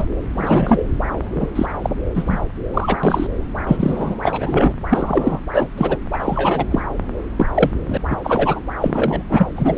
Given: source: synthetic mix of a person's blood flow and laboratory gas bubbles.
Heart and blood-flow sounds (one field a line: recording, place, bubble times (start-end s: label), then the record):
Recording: Doppler ultrasound of blood flow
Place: subclavian vein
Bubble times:
0.00-0.06 s: bubbles
0.32-0.83 s: bubbles
1.17-1.52 s: bubbles
1.55-1.66 s: bubbles
1.82-1.90 s: bubbles
2.14-2.41 s: bubbles
2.73-2.98 s: bubbles
3.03-3.27 s: bubbles
3.67-4.74 s: bubbles
4.90-5.39 s: bubbles
5.52-5.67 s: bubbles
5.77-5.97 s: bubbles
6.12-6.67 s: bubbles
6.70-6.82 s: bubbles
7.37-7.46 s: bubbles
7.54-7.70 s: bubbles
7.87-7.97 s: bubbles
8.10-8.17 s: bubbles
8.24-8.60 s: bubbles
8.80-9.24 s: bubbles
9.29-9.78 s: bubbles
From the record:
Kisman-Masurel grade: 243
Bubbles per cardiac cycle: several, 3 to 8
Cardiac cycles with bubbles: 100%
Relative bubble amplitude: loud (0.450 to 0.775)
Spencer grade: 3 (all of the cardiac periods contain showers or single bubble signals, but not dominating or overriding the cardiac motion signals)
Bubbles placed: anywhere in the cardiac cycle